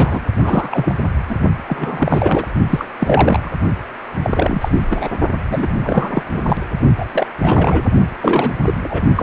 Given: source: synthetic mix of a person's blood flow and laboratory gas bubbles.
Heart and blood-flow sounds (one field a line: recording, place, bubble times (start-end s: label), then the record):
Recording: Doppler ultrasound of blood flow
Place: precordium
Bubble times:
0.00-0.21 s: bubbles
0.43-0.95 s: bubbles
1.28-1.35 s: bubbles
1.68-2.48 s: bubbles
2.69-2.86 s: bubbles
3.00-3.51 s: bubbles
4.22-4.82 s: bubbles
4.89-5.08 s: bubbles
5.49-5.79 s: bubbles
5.83-6.22 s: bubbles
6.34-6.42 s: bubbles
6.46-6.57 s: bubbles
6.97-7.05 s: bubbles
7.12-7.26 s: bubbles
7.42-7.85 s: bubbles
8.21-8.53 s: bubbles
8.66-8.74 s: bubbles
8.83-9.04 s: bubbles
9.15-9.23 s: bubbles
From the record:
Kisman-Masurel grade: 343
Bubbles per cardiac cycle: rolling drumbeat, 9 or more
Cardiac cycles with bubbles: 100%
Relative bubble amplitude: loud (0.450 to 0.775)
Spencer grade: 3 (all of the cardiac periods contain showers or single bubble signals, but not dominating or overriding the cardiac motion signals)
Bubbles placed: only in the low amplitude regions of the cardiac cycle